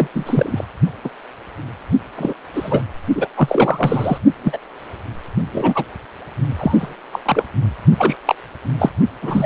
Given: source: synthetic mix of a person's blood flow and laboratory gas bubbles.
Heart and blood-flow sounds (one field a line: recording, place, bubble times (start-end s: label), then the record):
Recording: Doppler ultrasound of blood flow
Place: precordium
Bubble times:
0.00-0.07 s: bubbles
0.14-0.64 s: bubbles
1.04-1.09 s: bubbles
2.16-2.33 s: bubbles
2.54-2.83 s: bubbles
3.15-3.27 s: bubbles
3.37-4.18 s: bubbles
4.43-4.58 s: bubbles
5.53-5.84 s: bubbles
6.57-6.95 s: bubbles
7.12-7.20 s: bubbles
7.25-7.43 s: bubbles
7.97-8.16 s: bubbles
8.26-8.35 s: bubbles
8.78-8.89 s: bubbles
9.22-9.46 s: bubbles
From the record:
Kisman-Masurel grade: 243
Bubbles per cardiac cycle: several, 3 to 8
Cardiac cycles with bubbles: 100%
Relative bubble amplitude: loud (0.450 to 0.775)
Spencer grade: 3 (all of the cardiac periods contain showers or single bubble signals, but not dominating or overriding the cardiac motion signals)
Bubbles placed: only in the low amplitude regions of the cardiac cycle